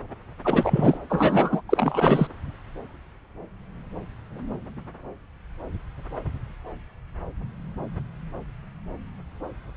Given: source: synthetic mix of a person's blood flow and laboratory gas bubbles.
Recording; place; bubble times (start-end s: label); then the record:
Doppler ultrasound of blood flow; subclavian vein
0.44-0.97 s: bubbles
1.09-1.61 s: bubbles
1.69-2.27 s: bubbles
From the record:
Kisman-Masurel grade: 223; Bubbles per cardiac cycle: several, 3 to 8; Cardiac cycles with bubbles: 10 to 50%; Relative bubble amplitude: loud (0.450 to 0.775); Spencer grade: 2 (many but less than half of the cardiac periods contain bubble signals, singularly or in groups); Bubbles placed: anywhere in the cardiac cycle